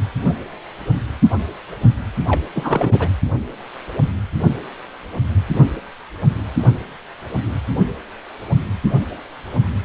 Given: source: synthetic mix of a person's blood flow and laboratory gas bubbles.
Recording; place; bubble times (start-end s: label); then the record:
Doppler ultrasound of blood flow; precordium
2.27-2.40 s: bubbles
2.54-3.08 s: bubbles
From the record:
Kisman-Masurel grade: 212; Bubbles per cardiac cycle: several, 3 to 8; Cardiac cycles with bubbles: 1 to 10%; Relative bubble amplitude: moderate (0.250 to 0.450); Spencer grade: 1 (occasional bubble signal discernible with the cardiac motion signal, with majority of cardiac periods free of bubbles); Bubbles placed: anywhere in the cardiac cycle